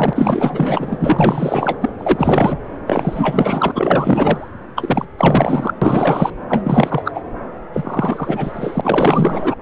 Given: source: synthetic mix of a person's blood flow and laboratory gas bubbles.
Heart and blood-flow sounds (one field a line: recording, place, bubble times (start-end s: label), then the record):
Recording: Doppler ultrasound of blood flow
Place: subclavian vein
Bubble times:
0.00-1.78 s: bubbles
1.81-1.90 s: bubbles
1.98-2.58 s: bubbles
2.86-3.71 s: bubbles
3.75-4.49 s: bubbles
4.76-5.05 s: bubbles
5.18-5.74 s: bubbles
5.81-6.30 s: bubbles
6.49-7.12 s: bubbles
7.15-7.21 s: bubbles
7.73-9.56 s: bubbles
From the record:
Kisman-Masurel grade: 444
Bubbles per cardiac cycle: continuous sound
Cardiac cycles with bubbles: 100%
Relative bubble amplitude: maximal (0.775 to 0.999)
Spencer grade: 4 (maximum detectable bubble signal sounding continuously throughout systole and diastole of every cardiac period, and overriding the amplitude of the normal cardiac signals)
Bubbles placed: anywhere in the cardiac cycle